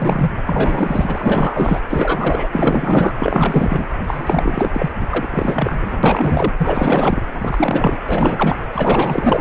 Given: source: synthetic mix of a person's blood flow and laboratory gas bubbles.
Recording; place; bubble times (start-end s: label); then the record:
Doppler ultrasound of blood flow; precordium
0.00-0.31 s: bubbles
0.46-1.81 s: bubbles
1.90-2.48 s: bubbles
2.52-3.13 s: bubbles
3.19-3.86 s: bubbles
4.07-4.70 s: bubbles
4.73-4.91 s: bubbles
5.00-5.07 s: bubbles
5.10-6.00 s: bubbles
6.03-6.53 s: bubbles
6.57-7.23 s: bubbles
7.34-7.99 s: bubbles
8.09-8.56 s: bubbles
8.72-9.41 s: bubbles
From the record:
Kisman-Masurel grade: 444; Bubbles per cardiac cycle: continuous sound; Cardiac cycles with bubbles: 100%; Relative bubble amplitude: maximal (0.775 to 0.999); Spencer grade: 4 (maximum detectable bubble signal sounding continuously throughout systole and diastole of every cardiac period, and overriding the amplitude of the normal cardiac signals); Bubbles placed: anywhere in the cardiac cycle